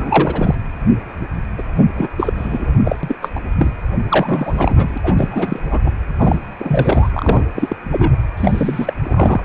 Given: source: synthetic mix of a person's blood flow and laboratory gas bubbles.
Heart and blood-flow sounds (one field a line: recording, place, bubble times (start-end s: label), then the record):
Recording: Doppler ultrasound of blood flow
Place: precordium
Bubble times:
0.00-0.54 s: bubbles
1.58-1.62 s: bubbles
1.78-1.86 s: bubbles
1.94-2.08 s: bubbles
2.18-2.75 s: bubbles
2.85-2.96 s: bubbles
3.03-3.16 s: bubbles
3.21-3.29 s: bubbles
3.35-3.41 s: bubbles
3.58-3.71 s: bubbles
4.08-4.98 s: bubbles
5.02-5.59 s: bubbles
5.70-5.79 s: bubbles
5.85-5.90 s: bubbles
6.18-6.40 s: bubbles
6.59-7.09 s: bubbles
7.12-7.45 s: bubbles
7.55-7.76 s: bubbles
7.91-8.17 s: bubbles
8.37-8.93 s: bubbles
9.03-9.45 s: bubbles
From the record:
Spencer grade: 3 (all of the cardiac periods contain showers or single bubble signals, but not dominating or overriding the cardiac motion signals)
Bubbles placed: anywhere in the cardiac cycle